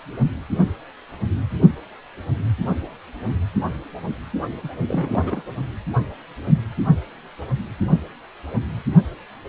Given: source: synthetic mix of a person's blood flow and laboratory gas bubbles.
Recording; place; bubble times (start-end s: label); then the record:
Doppler ultrasound of blood flow; precordium
4.63-4.68 s: bubbles
4.88-5.42 s: bubbles
From the record:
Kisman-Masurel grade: 211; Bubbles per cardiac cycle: several, 3 to 8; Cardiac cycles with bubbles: 1 to 10%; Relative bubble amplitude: barely perceptible (0.100 to 0.250); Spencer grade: 1 (occasional bubble signal discernible with the cardiac motion signal, with majority of cardiac periods free of bubbles); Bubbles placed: anywhere in the cardiac cycle